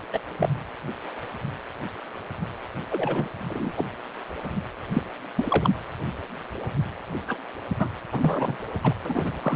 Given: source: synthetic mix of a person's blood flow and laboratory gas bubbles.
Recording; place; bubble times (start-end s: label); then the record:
Doppler ultrasound of blood flow; precordium
0.12-0.19 s: bubbles
0.39-0.49 s: bubbles
2.90-3.27 s: bubbles
3.48-3.73 s: bubbles
3.77-3.85 s: bubbles
4.93-5.03 s: bubbles
5.36-5.71 s: bubbles
7.28-7.36 s: bubbles
7.79-7.91 s: bubbles
8.12-8.57 s: bubbles
8.83-8.94 s: bubbles
9.04-9.34 s: bubbles
9.42-9.56 s: bubbles
From the record:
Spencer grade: 3 (all of the cardiac periods contain showers or single bubble signals, but not dominating or overriding the cardiac motion signals); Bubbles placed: anywhere in the cardiac cycle